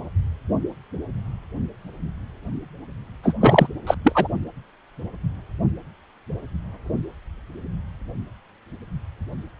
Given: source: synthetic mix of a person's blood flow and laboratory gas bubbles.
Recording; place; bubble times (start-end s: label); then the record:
Doppler ultrasound of blood flow; precordium
3.23-3.33 s: bubbles
3.41-3.67 s: bubbles
3.86-3.94 s: bubbles
4.04-4.12 s: bubbles
4.14-4.27 s: bubbles
From the record:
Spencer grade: 1 (occasional bubble signal discernible with the cardiac motion signal, with majority of cardiac periods free of bubbles); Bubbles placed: only in the low amplitude regions of the cardiac cycle